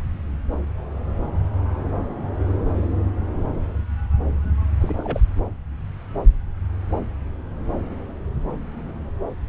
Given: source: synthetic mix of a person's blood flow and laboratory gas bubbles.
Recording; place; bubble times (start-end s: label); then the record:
Doppler ultrasound of blood flow; subclavian vein
4.80-5.21 s: bubbles
5.37-5.42 s: bubbles
From the record:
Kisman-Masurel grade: 211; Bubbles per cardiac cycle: several, 3 to 8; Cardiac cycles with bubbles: 1 to 10%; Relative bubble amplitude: barely perceptible (0.100 to 0.250); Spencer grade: 1 (occasional bubble signal discernible with the cardiac motion signal, with majority of cardiac periods free of bubbles); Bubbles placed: anywhere in the cardiac cycle